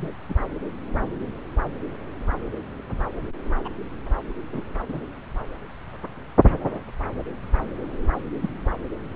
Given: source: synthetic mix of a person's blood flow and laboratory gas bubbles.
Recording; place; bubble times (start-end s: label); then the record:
Doppler ultrasound of blood flow; subclavian vein
0.00-0.08 s: bubbles
0.28-0.35 s: bubbles
3.65-3.69 s: bubbles
4.52-4.61 s: bubbles
4.88-5.00 s: bubbles
8.42-8.49 s: bubbles
From the record:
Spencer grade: 2 (many but less than half of the cardiac periods contain bubble signals, singularly or in groups); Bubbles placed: anywhere in the cardiac cycle